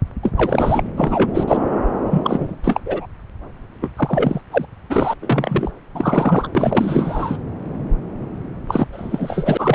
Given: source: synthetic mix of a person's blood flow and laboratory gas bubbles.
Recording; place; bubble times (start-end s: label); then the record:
Doppler ultrasound of blood flow; subclavian vein
0.23-0.31 s: bubbles
0.36-0.83 s: bubbles
0.96-1.44 s: bubbles
1.47-1.70 s: bubbles
2.10-2.56 s: bubbles
2.64-2.81 s: bubbles
2.85-3.06 s: bubbles
3.82-3.91 s: bubbles
3.96-4.41 s: bubbles
4.51-4.65 s: bubbles
4.89-5.13 s: bubbles
5.21-5.71 s: bubbles
5.94-6.47 s: bubbles
6.55-7.38 s: bubbles
8.68-8.88 s: bubbles
8.92-9.75 s: bubbles
From the record:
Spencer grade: 3 (all of the cardiac periods contain showers or single bubble signals, but not dominating or overriding the cardiac motion signals); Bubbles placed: anywhere in the cardiac cycle